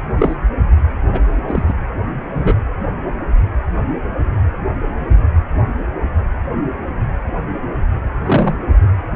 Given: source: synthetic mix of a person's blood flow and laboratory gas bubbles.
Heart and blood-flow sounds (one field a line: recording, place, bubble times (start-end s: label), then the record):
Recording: Doppler ultrasound of blood flow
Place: precordium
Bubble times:
0.18-0.35 s: bubbles
1.07-1.20 s: bubbles
1.48-1.74 s: bubbles
2.33-2.57 s: bubbles
8.25-8.57 s: bubbles
From the record:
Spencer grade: 2 (many but less than half of the cardiac periods contain bubble signals, singularly or in groups)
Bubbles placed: anywhere in the cardiac cycle